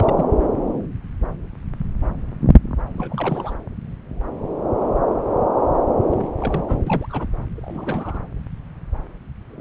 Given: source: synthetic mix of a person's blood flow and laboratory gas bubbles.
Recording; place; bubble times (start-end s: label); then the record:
Doppler ultrasound of blood flow; subclavian vein
0.00-0.25 s: bubbles
2.96-3.53 s: bubbles
6.11-6.28 s: bubbles
6.40-6.83 s: bubbles
6.87-7.28 s: bubbles
7.57-8.21 s: bubbles
From the record:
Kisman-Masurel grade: 221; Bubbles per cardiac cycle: several, 3 to 8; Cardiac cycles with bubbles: 10 to 50%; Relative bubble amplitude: barely perceptible (0.100 to 0.250); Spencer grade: 2 (many but less than half of the cardiac periods contain bubble signals, singularly or in groups); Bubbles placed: anywhere in the cardiac cycle